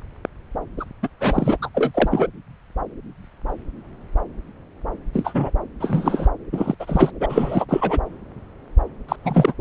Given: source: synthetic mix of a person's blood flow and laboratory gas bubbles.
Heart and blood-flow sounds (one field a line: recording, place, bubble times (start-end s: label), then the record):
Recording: Doppler ultrasound of blood flow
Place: subclavian vein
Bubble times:
0.77-0.84 s: bubbles
1.02-1.08 s: bubbles
1.19-1.57 s: bubbles
1.62-1.69 s: bubbles
1.74-2.28 s: bubbles
5.13-5.50 s: bubbles
5.79-6.28 s: bubbles
6.52-6.75 s: bubbles
6.79-7.11 s: bubbles
7.20-7.66 s: bubbles
7.69-8.01 s: bubbles
9.08-9.16 s: bubbles
9.23-9.53 s: bubbles
From the record:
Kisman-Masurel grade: 223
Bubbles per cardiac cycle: several, 3 to 8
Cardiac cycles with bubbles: 10 to 50%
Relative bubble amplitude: loud (0.450 to 0.775)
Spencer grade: 2 (many but less than half of the cardiac periods contain bubble signals, singularly or in groups)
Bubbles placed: anywhere in the cardiac cycle